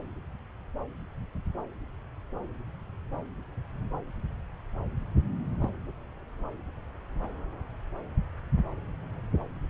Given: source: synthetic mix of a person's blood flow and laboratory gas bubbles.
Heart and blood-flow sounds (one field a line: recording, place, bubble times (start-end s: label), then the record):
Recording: Doppler ultrasound of blood flow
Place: subclavian vein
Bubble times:
5.62-5.68 s: bubbles
From the record:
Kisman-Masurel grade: 111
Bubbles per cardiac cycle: 1 to 2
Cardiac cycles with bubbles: 1 to 10%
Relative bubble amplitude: barely perceptible (0.100 to 0.250)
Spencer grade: 1 (occasional bubble signal discernible with the cardiac motion signal, with majority of cardiac periods free of bubbles)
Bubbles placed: anywhere in the cardiac cycle